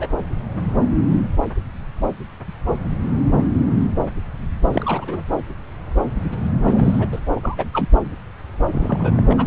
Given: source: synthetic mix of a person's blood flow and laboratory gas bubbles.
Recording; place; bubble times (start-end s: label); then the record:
Doppler ultrasound of blood flow; subclavian vein
0.00-0.07 s: bubbles
4.71-5.26 s: bubbles
6.65-7.07 s: bubbles
7.12-7.21 s: bubbles
7.35-7.88 s: bubbles
8.71-9.21 s: bubbles
9.30-9.34 s: bubbles
9.38-9.47 s: bubbles
From the record:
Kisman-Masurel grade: 222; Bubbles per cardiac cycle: several, 3 to 8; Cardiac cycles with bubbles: 10 to 50%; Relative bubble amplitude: moderate (0.250 to 0.450); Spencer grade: 2 (many but less than half of the cardiac periods contain bubble signals, singularly or in groups); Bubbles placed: anywhere in the cardiac cycle